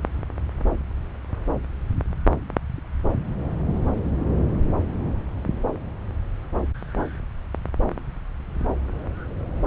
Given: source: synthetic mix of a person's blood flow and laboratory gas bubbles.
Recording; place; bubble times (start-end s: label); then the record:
Doppler ultrasound of blood flow; subclavian vein
no bubbles
From the record:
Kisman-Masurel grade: 000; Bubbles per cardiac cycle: 0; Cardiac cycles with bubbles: 0%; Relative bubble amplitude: no bubbles discernible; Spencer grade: 0 (complete lack of bubble signals)